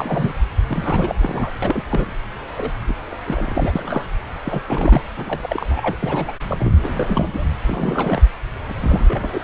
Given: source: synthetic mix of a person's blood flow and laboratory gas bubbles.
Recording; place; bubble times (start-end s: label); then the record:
Doppler ultrasound of blood flow; subclavian vein
0.00-0.32 s: bubbles
0.67-1.51 s: bubbles
1.62-1.83 s: bubbles
1.89-2.12 s: bubbles
2.56-2.71 s: bubbles
2.88-2.94 s: bubbles
3.11-3.15 s: bubbles
3.24-3.73 s: bubbles
3.75-4.10 s: bubbles
4.44-4.62 s: bubbles
4.68-5.02 s: bubbles
5.16-5.97 s: bubbles
6.02-6.35 s: bubbles
6.47-6.72 s: bubbles
6.83-7.49 s: bubbles
7.64-8.21 s: bubbles
8.67-8.74 s: bubbles
8.79-9.41 s: bubbles
From the record:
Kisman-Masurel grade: 342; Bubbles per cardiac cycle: rolling drumbeat, 9 or more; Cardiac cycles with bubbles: 100%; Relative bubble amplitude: moderate (0.250 to 0.450); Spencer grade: 3 (all of the cardiac periods contain showers or single bubble signals, but not dominating or overriding the cardiac motion signals); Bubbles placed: anywhere in the cardiac cycle